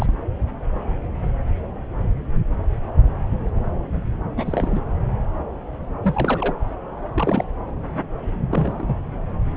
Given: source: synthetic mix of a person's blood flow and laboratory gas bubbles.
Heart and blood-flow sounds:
Doppler ultrasound of blood flow; subclavian vein
0.00-0.16 s: bubbles
4.37-4.83 s: bubbles
6.03-6.54 s: bubbles
7.14-7.45 s: bubbles
8.51-8.96 s: bubbles
From the record:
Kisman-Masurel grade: 221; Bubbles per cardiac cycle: several, 3 to 8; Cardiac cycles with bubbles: 10 to 50%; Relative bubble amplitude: barely perceptible (0.100 to 0.250); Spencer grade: 2 (many but less than half of the cardiac periods contain bubble signals, singularly or in groups); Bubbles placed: anywhere in the cardiac cycle

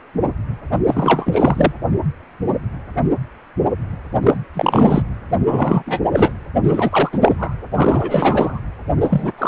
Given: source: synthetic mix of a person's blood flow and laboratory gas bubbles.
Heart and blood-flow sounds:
Doppler ultrasound of blood flow; precordium
0.72-0.77 s: bubbles
0.85-1.73 s: bubbles
4.23-4.37 s: bubbles
4.54-5.02 s: bubbles
5.41-5.83 s: bubbles
5.86-5.99 s: bubbles
6.12-6.33 s: bubbles
6.63-7.09 s: bubbles
7.12-7.55 s: bubbles
7.74-8.60 s: bubbles
9.00-9.32 s: bubbles
9.38-9.48 s: bubbles
From the record:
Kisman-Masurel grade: 333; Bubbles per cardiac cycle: rolling drumbeat, 9 or more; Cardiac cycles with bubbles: 50 to 99%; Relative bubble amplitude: loud (0.450 to 0.775); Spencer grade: 3 (all of the cardiac periods contain showers or single bubble signals, but not dominating or overriding the cardiac motion signals); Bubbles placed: anywhere in the cardiac cycle

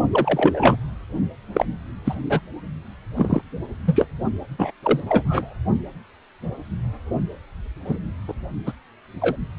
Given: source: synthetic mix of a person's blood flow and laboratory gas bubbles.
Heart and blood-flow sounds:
Doppler ultrasound of blood flow; precordium
0.12-0.77 s: bubbles
1.53-1.66 s: bubbles
2.05-2.15 s: bubbles
2.29-2.41 s: bubbles
3.16-3.42 s: bubbles
3.85-4.07 s: bubbles
4.58-4.71 s: bubbles
4.83-5.00 s: bubbles
5.08-5.54 s: bubbles
7.84-7.97 s: bubbles
8.28-8.33 s: bubbles
8.66-8.72 s: bubbles
9.21-9.36 s: bubbles
From the record:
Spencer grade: 3 (all of the cardiac periods contain showers or single bubble signals, but not dominating or overriding the cardiac motion signals); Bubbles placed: only in the low amplitude regions of the cardiac cycle

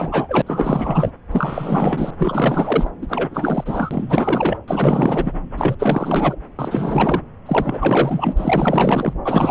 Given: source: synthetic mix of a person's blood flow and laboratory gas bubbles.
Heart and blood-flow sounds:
Doppler ultrasound of blood flow; subclavian vein
0.00-0.42 s: bubbles
0.46-1.12 s: bubbles
1.31-2.10 s: bubbles
2.19-2.90 s: bubbles
3.02-4.57 s: bubbles
4.68-5.33 s: bubbles
5.57-5.75 s: bubbles
5.79-6.36 s: bubbles
6.59-7.21 s: bubbles
7.46-9.13 s: bubbles
9.24-9.51 s: bubbles
From the record:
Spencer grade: 4 (maximum detectable bubble signal sounding continuously throughout systole and diastole of every cardiac period, and overriding the amplitude of the normal cardiac signals); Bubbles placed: anywhere in the cardiac cycle

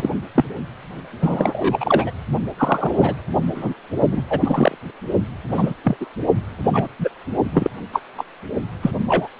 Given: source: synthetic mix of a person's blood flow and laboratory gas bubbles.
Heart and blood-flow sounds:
Doppler ultrasound of blood flow; precordium
0.00-0.10 s: bubbles
0.35-0.44 s: bubbles
1.22-2.11 s: bubbles
2.58-3.15 s: bubbles
3.54-3.74 s: bubbles
4.11-4.22 s: bubbles
4.29-4.78 s: bubbles
5.51-5.74 s: bubbles
5.83-5.97 s: bubbles
6.00-6.06 s: bubbles
6.63-6.87 s: bubbles
6.99-7.08 s: bubbles
7.53-7.71 s: bubbles
7.93-8.00 s: bubbles
8.18-8.24 s: bubbles
8.82-8.91 s: bubbles
9.07-9.28 s: bubbles
From the record:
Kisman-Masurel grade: 243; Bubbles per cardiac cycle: several, 3 to 8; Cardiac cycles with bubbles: 100%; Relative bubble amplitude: loud (0.450 to 0.775); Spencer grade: 3 (all of the cardiac periods contain showers or single bubble signals, but not dominating or overriding the cardiac motion signals); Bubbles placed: only in the low amplitude regions of the cardiac cycle

